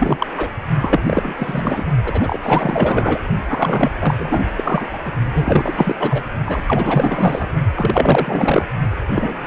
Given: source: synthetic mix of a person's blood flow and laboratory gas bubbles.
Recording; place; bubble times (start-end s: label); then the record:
Doppler ultrasound of blood flow; precordium
0.00-0.27 s: bubbles
0.38-0.49 s: bubbles
0.82-1.33 s: bubbles
1.38-1.86 s: bubbles
2.04-2.40 s: bubbles
2.42-3.20 s: bubbles
3.48-4.42 s: bubbles
4.57-4.89 s: bubbles
4.92-4.99 s: bubbles
5.05-5.12 s: bubbles
5.33-5.96 s: bubbles
5.99-6.25 s: bubbles
6.46-6.61 s: bubbles
6.66-7.47 s: bubbles
7.75-8.66 s: bubbles
9.06-9.47 s: bubbles
From the record:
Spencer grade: 4 (maximum detectable bubble signal sounding continuously throughout systole and diastole of every cardiac period, and overriding the amplitude of the normal cardiac signals); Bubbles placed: only in the low amplitude regions of the cardiac cycle